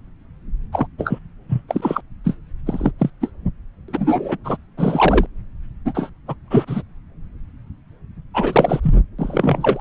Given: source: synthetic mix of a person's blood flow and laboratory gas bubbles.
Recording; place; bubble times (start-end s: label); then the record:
Doppler ultrasound of blood flow; subclavian vein
0.72-0.87 s: bubbles
0.98-1.19 s: bubbles
1.49-1.62 s: bubbles
1.68-2.01 s: bubbles
2.24-2.36 s: bubbles
2.66-2.92 s: bubbles
2.98-3.10 s: bubbles
3.21-3.31 s: bubbles
3.88-4.37 s: bubbles
4.44-4.57 s: bubbles
4.77-5.26 s: bubbles
5.85-6.09 s: bubbles
6.27-6.34 s: bubbles
6.48-6.83 s: bubbles
8.34-8.80 s: bubbles
8.82-8.95 s: bubbles
9.19-9.80 s: bubbles
From the record:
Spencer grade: 3 (all of the cardiac periods contain showers or single bubble signals, but not dominating or overriding the cardiac motion signals); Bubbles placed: anywhere in the cardiac cycle